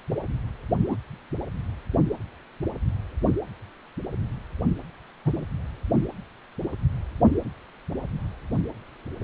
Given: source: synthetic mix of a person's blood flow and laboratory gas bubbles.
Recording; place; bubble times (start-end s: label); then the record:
Doppler ultrasound of blood flow; precordium
0.88-0.97 s: bubbles
5.25-5.45 s: bubbles
From the record:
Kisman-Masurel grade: 122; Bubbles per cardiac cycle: 1 to 2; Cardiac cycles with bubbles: 10 to 50%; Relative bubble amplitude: moderate (0.250 to 0.450); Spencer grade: 2 (many but less than half of the cardiac periods contain bubble signals, singularly or in groups); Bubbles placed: anywhere in the cardiac cycle